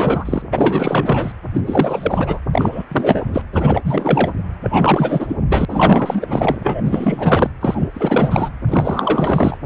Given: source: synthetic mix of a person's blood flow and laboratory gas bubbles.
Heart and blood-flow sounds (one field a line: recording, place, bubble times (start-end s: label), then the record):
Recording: Doppler ultrasound of blood flow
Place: precordium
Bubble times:
0.00-0.42 s: bubbles
0.52-1.33 s: bubbles
1.54-1.62 s: bubbles
1.66-2.40 s: bubbles
2.52-2.84 s: bubbles
2.91-3.42 s: bubbles
3.52-3.81 s: bubbles
3.84-4.32 s: bubbles
4.62-5.36 s: bubbles
5.49-5.65 s: bubbles
5.68-6.57 s: bubbles
6.63-7.50 s: bubbles
7.61-7.88 s: bubbles
7.93-8.50 s: bubbles
8.67-9.58 s: bubbles
From the record:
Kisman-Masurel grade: 444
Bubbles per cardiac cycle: continuous sound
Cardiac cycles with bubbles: 100%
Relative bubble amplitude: maximal (0.775 to 0.999)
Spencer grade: 4 (maximum detectable bubble signal sounding continuously throughout systole and diastole of every cardiac period, and overriding the amplitude of the normal cardiac signals)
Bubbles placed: anywhere in the cardiac cycle